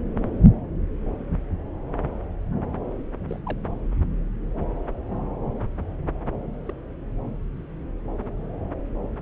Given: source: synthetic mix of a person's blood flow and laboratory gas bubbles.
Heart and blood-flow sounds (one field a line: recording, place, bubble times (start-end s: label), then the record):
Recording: Doppler ultrasound of blood flow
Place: subclavian vein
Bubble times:
3.29-3.40 s: bubbles
3.45-3.58 s: bubbles
5.08-5.16 s: bubbles
6.68-6.72 s: bubbles
From the record:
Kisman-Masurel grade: 121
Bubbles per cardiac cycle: 1 to 2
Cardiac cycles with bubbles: 10 to 50%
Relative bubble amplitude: barely perceptible (0.100 to 0.250)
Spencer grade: 2 (many but less than half of the cardiac periods contain bubble signals, singularly or in groups)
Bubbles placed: anywhere in the cardiac cycle